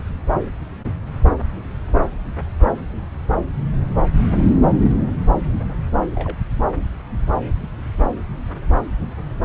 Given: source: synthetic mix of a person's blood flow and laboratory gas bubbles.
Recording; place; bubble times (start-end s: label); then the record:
Doppler ultrasound of blood flow; subclavian vein
4.79-4.91 s: bubbles
5.50-5.65 s: bubbles
6.15-6.38 s: bubbles
From the record:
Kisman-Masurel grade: 111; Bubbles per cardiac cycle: 1 to 2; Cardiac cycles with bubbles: 1 to 10%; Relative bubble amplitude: barely perceptible (0.100 to 0.250); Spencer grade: 1 (occasional bubble signal discernible with the cardiac motion signal, with majority of cardiac periods free of bubbles); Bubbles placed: anywhere in the cardiac cycle